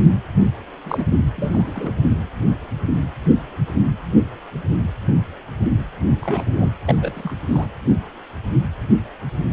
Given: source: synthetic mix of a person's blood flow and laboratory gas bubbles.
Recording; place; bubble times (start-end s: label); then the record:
Doppler ultrasound of blood flow; precordium
0.84-1.04 s: bubbles
1.36-1.92 s: bubbles
6.21-6.71 s: bubbles
6.86-6.96 s: bubbles
7.00-7.12 s: bubbles
7.15-7.37 s: bubbles
7.48-7.67 s: bubbles
From the record:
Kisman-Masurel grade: 222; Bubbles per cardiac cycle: several, 3 to 8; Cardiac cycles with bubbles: 10 to 50%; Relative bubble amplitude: moderate (0.250 to 0.450); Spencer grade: 2 (many but less than half of the cardiac periods contain bubble signals, singularly or in groups); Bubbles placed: anywhere in the cardiac cycle